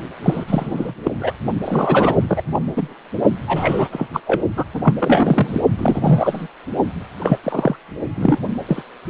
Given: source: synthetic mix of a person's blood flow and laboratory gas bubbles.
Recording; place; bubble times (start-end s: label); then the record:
Doppler ultrasound of blood flow; precordium
0.22-0.44 s: bubbles
0.47-0.92 s: bubbles
1.03-1.11 s: bubbles
1.20-1.32 s: bubbles
1.64-2.17 s: bubbles
2.29-2.42 s: bubbles
2.53-2.60 s: bubbles
2.76-2.95 s: bubbles
3.46-3.88 s: bubbles
3.92-4.08 s: bubbles
4.13-4.20 s: bubbles
4.26-4.41 s: bubbles
4.56-4.64 s: bubbles
4.73-4.80 s: bubbles
4.83-4.94 s: bubbles
4.98-5.61 s: bubbles
5.77-6.47 s: bubbles
7.19-7.38 s: bubbles
7.43-7.75 s: bubbles
8.16-8.37 s: bubbles
8.67-8.82 s: bubbles
From the record:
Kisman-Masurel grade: 233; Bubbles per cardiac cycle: several, 3 to 8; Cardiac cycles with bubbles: 50 to 99%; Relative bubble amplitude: loud (0.450 to 0.775); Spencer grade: 3 (all of the cardiac periods contain showers or single bubble signals, but not dominating or overriding the cardiac motion signals); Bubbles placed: only in the low amplitude regions of the cardiac cycle